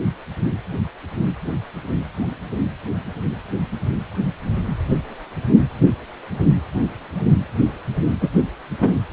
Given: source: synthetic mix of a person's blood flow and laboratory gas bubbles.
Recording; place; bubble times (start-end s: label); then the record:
Doppler ultrasound of blood flow; precordium
8.21-8.29 s: bubbles
8.79-8.92 s: bubbles
From the record:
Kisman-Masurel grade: 113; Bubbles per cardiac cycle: 1 to 2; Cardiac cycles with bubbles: 1 to 10%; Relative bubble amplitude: loud (0.450 to 0.775); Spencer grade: 1 (occasional bubble signal discernible with the cardiac motion signal, with majority of cardiac periods free of bubbles); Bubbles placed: anywhere in the cardiac cycle